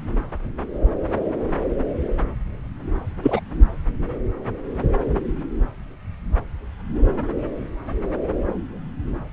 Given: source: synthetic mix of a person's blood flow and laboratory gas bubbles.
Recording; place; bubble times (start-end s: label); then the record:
Doppler ultrasound of blood flow; subclavian vein
3.22-3.40 s: bubbles
From the record:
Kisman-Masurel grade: 113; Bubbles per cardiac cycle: 1 to 2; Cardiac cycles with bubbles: 1 to 10%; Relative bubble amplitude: loud (0.450 to 0.775); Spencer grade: 1 (occasional bubble signal discernible with the cardiac motion signal, with majority of cardiac periods free of bubbles); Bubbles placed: anywhere in the cardiac cycle